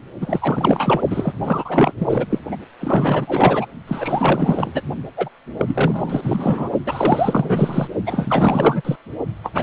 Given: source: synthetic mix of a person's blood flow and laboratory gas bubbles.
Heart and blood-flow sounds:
Doppler ultrasound of blood flow; precordium
0.21-1.02 s: bubbles
1.10-1.33 s: bubbles
1.44-1.93 s: bubbles
1.98-2.26 s: bubbles
2.29-2.38 s: bubbles
2.51-2.56 s: bubbles
2.79-3.66 s: bubbles
3.88-4.82 s: bubbles
5.17-5.29 s: bubbles
5.56-6.70 s: bubbles
6.85-7.88 s: bubbles
8.06-8.82 s: bubbles
8.85-8.96 s: bubbles
9.43-9.63 s: bubbles
From the record:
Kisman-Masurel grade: 444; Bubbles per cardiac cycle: continuous sound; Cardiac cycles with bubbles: 100%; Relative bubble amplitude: maximal (0.775 to 0.999); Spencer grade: 4 (maximum detectable bubble signal sounding continuously throughout systole and diastole of every cardiac period, and overriding the amplitude of the normal cardiac signals); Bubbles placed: only in the low amplitude regions of the cardiac cycle

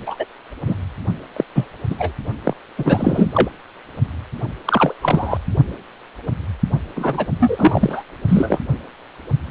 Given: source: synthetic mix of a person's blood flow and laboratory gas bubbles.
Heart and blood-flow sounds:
Doppler ultrasound of blood flow; precordium
0.07-0.16 s: bubbles
0.19-0.26 s: bubbles
0.65-0.75 s: bubbles
1.36-1.44 s: bubbles
1.55-1.68 s: bubbles
1.90-1.96 s: bubbles
1.98-2.13 s: bubbles
2.44-2.54 s: bubbles
2.77-3.50 s: bubbles
4.65-4.94 s: bubbles
5.01-5.38 s: bubbles
6.96-7.26 s: bubbles
7.39-8.03 s: bubbles
8.28-8.60 s: bubbles
From the record:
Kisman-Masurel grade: 233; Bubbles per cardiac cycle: several, 3 to 8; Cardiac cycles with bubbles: 50 to 99%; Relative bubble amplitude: loud (0.450 to 0.775); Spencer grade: 3 (all of the cardiac periods contain showers or single bubble signals, but not dominating or overriding the cardiac motion signals); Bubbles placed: only in the low amplitude regions of the cardiac cycle

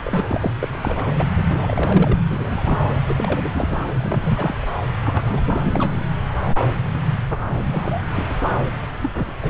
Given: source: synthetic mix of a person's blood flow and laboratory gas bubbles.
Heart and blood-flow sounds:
Doppler ultrasound of blood flow; subclavian vein
0.03-0.52 s: bubbles
0.59-0.69 s: bubbles
0.72-1.14 s: bubbles
1.18-1.29 s: bubbles
1.37-1.43 s: bubbles
1.51-2.17 s: bubbles
2.30-3.00 s: bubbles
3.08-3.78 s: bubbles
3.98-4.54 s: bubbles
4.62-4.66 s: bubbles
5.04-6.04 s: bubbles
7.30-7.40 s: bubbles
7.72-8.04 s: bubbles
8.13-8.26 s: bubbles
8.29-8.36 s: bubbles
8.41-8.48 s: bubbles
9.01-9.10 s: bubbles
9.17-9.33 s: bubbles
9.42-9.50 s: bubbles
From the record:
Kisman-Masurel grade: 232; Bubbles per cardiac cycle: several, 3 to 8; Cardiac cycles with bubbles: 50 to 99%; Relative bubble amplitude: moderate (0.250 to 0.450); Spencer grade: 3 (all of the cardiac periods contain showers or single bubble signals, but not dominating or overriding the cardiac motion signals); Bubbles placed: anywhere in the cardiac cycle

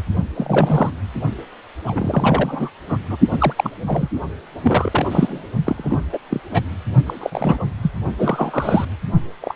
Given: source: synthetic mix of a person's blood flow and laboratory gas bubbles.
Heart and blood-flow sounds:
Doppler ultrasound of blood flow; precordium
0.00-0.02 s: bubbles
0.35-0.90 s: bubbles
1.84-2.70 s: bubbles
2.88-2.97 s: bubbles
3.08-3.17 s: bubbles
3.31-3.53 s: bubbles
3.56-3.70 s: bubbles
3.85-4.08 s: bubbles
4.63-5.45 s: bubbles
5.63-6.00 s: bubbles
6.12-6.18 s: bubbles
6.30-6.41 s: bubbles
6.50-6.60 s: bubbles
7.06-7.65 s: bubbles
7.82-7.91 s: bubbles
8.18-8.87 s: bubbles
9.42-9.54 s: bubbles
From the record:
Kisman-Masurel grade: 242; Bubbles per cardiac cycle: several, 3 to 8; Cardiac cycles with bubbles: 100%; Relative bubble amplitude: moderate (0.250 to 0.450); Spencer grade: 3 (all of the cardiac periods contain showers or single bubble signals, but not dominating or overriding the cardiac motion signals); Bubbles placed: only in the low amplitude regions of the cardiac cycle

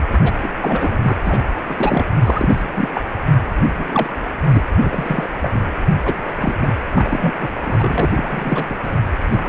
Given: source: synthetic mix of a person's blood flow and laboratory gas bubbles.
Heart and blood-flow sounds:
Doppler ultrasound of blood flow; precordium
0.11-0.19 s: bubbles
0.21-0.31 s: bubbles
0.42-0.52 s: bubbles
0.62-0.98 s: bubbles
1.02-1.16 s: bubbles
1.23-1.43 s: bubbles
1.69-2.05 s: bubbles
2.22-2.91 s: bubbles
2.94-3.02 s: bubbles
3.77-4.10 s: bubbles
4.44-4.62 s: bubbles
4.83-5.29 s: bubbles
5.42-5.63 s: bubbles
6.05-6.55 s: bubbles
6.61-6.71 s: bubbles
6.94-7.33 s: bubbles
7.40-7.48 s: bubbles
7.65-8.11 s: bubbles
8.13-8.66 s: bubbles
8.69-8.76 s: bubbles
8.84-9.00 s: bubbles
9.32-9.49 s: bubbles
From the record:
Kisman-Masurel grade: 243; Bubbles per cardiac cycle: several, 3 to 8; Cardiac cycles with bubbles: 100%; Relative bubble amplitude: loud (0.450 to 0.775); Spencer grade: 3 (all of the cardiac periods contain showers or single bubble signals, but not dominating or overriding the cardiac motion signals); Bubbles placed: anywhere in the cardiac cycle

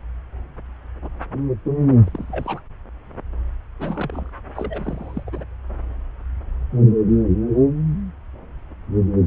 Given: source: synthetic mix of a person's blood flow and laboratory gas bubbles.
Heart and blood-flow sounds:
Doppler ultrasound of blood flow; subclavian vein
2.06-2.60 s: bubbles
3.79-4.26 s: bubbles
4.55-5.24 s: bubbles
5.26-5.45 s: bubbles
From the record:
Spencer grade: 2 (many but less than half of the cardiac periods contain bubble signals, singularly or in groups); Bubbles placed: anywhere in the cardiac cycle

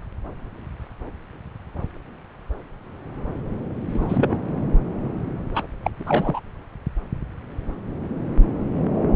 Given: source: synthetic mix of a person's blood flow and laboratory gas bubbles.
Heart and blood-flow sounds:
Doppler ultrasound of blood flow; subclavian vein
3.93-4.38 s: bubbles
5.54-5.67 s: bubbles
5.84-5.91 s: bubbles
6.00-6.40 s: bubbles
From the record:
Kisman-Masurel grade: 222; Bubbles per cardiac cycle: several, 3 to 8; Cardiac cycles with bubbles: 10 to 50%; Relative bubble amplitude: moderate (0.250 to 0.450); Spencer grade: 2 (many but less than half of the cardiac periods contain bubble signals, singularly or in groups); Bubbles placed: anywhere in the cardiac cycle

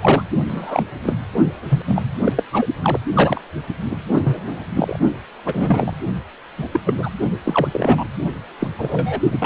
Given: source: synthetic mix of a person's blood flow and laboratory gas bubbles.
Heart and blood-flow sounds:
Doppler ultrasound of blood flow; precordium
0.00-0.22 s: bubbles
0.48-0.83 s: bubbles
1.03-1.16 s: bubbles
1.69-1.82 s: bubbles
1.85-2.02 s: bubbles
2.25-2.33 s: bubbles
2.36-2.43 s: bubbles
2.52-2.66 s: bubbles
2.83-2.98 s: bubbles
3.14-3.40 s: bubbles
3.91-3.96 s: bubbles
4.12-4.64 s: bubbles
4.74-4.99 s: bubbles
5.46-5.93 s: bubbles
6.58-6.68 s: bubbles
6.72-6.80 s: bubbles
6.85-6.94 s: bubbles
6.97-7.09 s: bubbles
7.45-7.68 s: bubbles
7.72-8.04 s: bubbles
8.59-8.68 s: bubbles
8.78-9.20 s: bubbles
9.32-9.46 s: bubbles
From the record:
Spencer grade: 3 (all of the cardiac periods contain showers or single bubble signals, but not dominating or overriding the cardiac motion signals); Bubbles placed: only in the low amplitude regions of the cardiac cycle

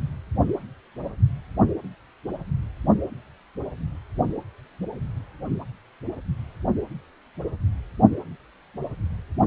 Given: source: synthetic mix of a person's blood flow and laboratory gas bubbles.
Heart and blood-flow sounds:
Doppler ultrasound of blood flow; precordium
no bubbles
From the record:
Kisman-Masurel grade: 000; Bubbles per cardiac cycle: 0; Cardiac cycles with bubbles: 0%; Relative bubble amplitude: no bubbles discernible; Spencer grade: 0 (complete lack of bubble signals)

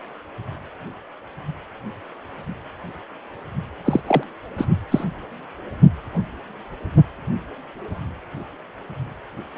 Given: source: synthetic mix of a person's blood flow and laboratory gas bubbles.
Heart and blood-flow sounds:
Doppler ultrasound of blood flow; precordium
3.85-4.01 s: bubbles
4.06-4.23 s: bubbles
4.57-4.65 s: bubbles
4.91-5.04 s: bubbles
From the record:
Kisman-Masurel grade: 213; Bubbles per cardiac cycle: several, 3 to 8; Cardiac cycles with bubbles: 1 to 10%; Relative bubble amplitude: loud (0.450 to 0.775); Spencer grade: 1 (occasional bubble signal discernible with the cardiac motion signal, with majority of cardiac periods free of bubbles); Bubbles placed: anywhere in the cardiac cycle

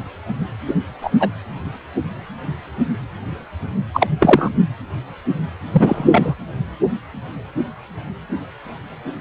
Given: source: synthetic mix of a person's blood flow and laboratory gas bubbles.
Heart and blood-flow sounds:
Doppler ultrasound of blood flow; precordium
0.67-0.74 s: bubbles
1.02-1.11 s: bubbles
1.19-1.29 s: bubbles
3.94-4.07 s: bubbles
4.19-4.49 s: bubbles
5.72-6.34 s: bubbles
From the record:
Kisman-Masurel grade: 223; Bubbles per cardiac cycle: several, 3 to 8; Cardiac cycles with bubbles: 10 to 50%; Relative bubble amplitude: loud (0.450 to 0.775); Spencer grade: 2 (many but less than half of the cardiac periods contain bubble signals, singularly or in groups); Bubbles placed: anywhere in the cardiac cycle

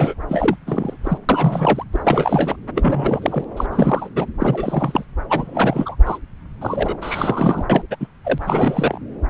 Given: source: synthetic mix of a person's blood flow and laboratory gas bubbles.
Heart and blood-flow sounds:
Doppler ultrasound of blood flow; subclavian vein
0.00-0.14 s: bubbles
0.28-0.56 s: bubbles
0.66-0.96 s: bubbles
1.04-1.17 s: bubbles
1.29-1.83 s: bubbles
1.92-2.56 s: bubbles
2.75-3.44 s: bubbles
3.56-3.67 s: bubbles
3.70-4.09 s: bubbles
4.15-4.25 s: bubbles
4.39-5.05 s: bubbles
5.29-5.96 s: bubbles
6.05-6.18 s: bubbles
6.61-6.96 s: bubbles
7.01-7.66 s: bubbles
7.69-7.83 s: bubbles
7.91-7.96 s: bubbles
8.00-8.08 s: bubbles
8.25-8.98 s: bubbles
From the record:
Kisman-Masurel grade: 343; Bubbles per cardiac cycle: rolling drumbeat, 9 or more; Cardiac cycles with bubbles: 100%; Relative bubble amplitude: loud (0.450 to 0.775); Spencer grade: 3 (all of the cardiac periods contain showers or single bubble signals, but not dominating or overriding the cardiac motion signals); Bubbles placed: anywhere in the cardiac cycle

